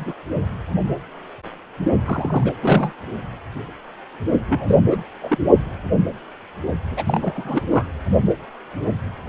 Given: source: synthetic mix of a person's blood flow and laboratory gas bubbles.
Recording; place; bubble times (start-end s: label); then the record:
Doppler ultrasound of blood flow; precordium
0.00-0.13 s: bubbles
2.05-2.53 s: bubbles
2.60-2.92 s: bubbles
4.48-4.78 s: bubbles
4.90-5.02 s: bubbles
5.21-5.37 s: bubbles
6.88-7.03 s: bubbles
7.06-7.63 s: bubbles
7.71-7.86 s: bubbles
From the record:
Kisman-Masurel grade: 232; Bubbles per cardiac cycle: several, 3 to 8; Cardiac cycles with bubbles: 50 to 99%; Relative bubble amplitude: moderate (0.250 to 0.450); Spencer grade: 3 (all of the cardiac periods contain showers or single bubble signals, but not dominating or overriding the cardiac motion signals); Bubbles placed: only in the low amplitude regions of the cardiac cycle